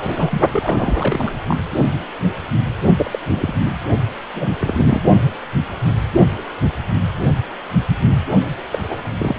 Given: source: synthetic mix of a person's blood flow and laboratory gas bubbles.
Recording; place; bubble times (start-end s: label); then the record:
Doppler ultrasound of blood flow; precordium
0.00-0.41 s: bubbles
0.53-1.32 s: bubbles
1.46-1.56 s: bubbles
2.97-3.19 s: bubbles
3.31-3.54 s: bubbles
3.64-3.72 s: bubbles
4.34-4.55 s: bubbles
4.60-5.03 s: bubbles
8.71-8.79 s: bubbles
8.82-9.03 s: bubbles
9.19-9.37 s: bubbles
From the record:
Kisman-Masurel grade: 232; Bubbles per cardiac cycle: several, 3 to 8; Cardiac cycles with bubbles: 50 to 99%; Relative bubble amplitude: moderate (0.250 to 0.450); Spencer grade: 3 (all of the cardiac periods contain showers or single bubble signals, but not dominating or overriding the cardiac motion signals); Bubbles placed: only in the low amplitude regions of the cardiac cycle